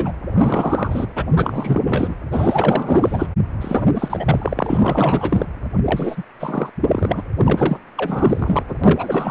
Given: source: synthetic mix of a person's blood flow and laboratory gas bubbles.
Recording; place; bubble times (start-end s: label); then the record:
Doppler ultrasound of blood flow; precordium
0.00-0.12 s: bubbles
0.32-1.06 s: bubbles
1.16-1.25 s: bubbles
1.34-2.14 s: bubbles
2.32-3.26 s: bubbles
3.61-5.47 s: bubbles
5.85-6.24 s: bubbles
6.39-6.70 s: bubbles
6.87-7.23 s: bubbles
7.38-7.77 s: bubbles
7.97-8.63 s: bubbles
8.68-8.74 s: bubbles
8.83-9.31 s: bubbles
From the record:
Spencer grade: 4 (maximum detectable bubble signal sounding continuously throughout systole and diastole of every cardiac period, and overriding the amplitude of the normal cardiac signals); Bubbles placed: anywhere in the cardiac cycle